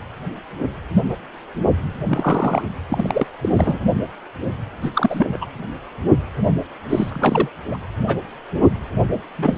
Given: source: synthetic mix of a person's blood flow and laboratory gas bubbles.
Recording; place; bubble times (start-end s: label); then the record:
Doppler ultrasound of blood flow; precordium
2.08-2.64 s: bubbles
2.88-3.27 s: bubbles
3.42-3.49 s: bubbles
3.53-3.79 s: bubbles
4.82-4.90 s: bubbles
4.94-5.36 s: bubbles
5.41-5.46 s: bubbles
6.89-7.49 s: bubbles
7.70-7.77 s: bubbles
8.07-8.17 s: bubbles
9.36-9.58 s: bubbles
From the record:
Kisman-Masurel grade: 223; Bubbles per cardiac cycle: several, 3 to 8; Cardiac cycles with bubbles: 10 to 50%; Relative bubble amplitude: loud (0.450 to 0.775); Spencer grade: 2 (many but less than half of the cardiac periods contain bubble signals, singularly or in groups); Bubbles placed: anywhere in the cardiac cycle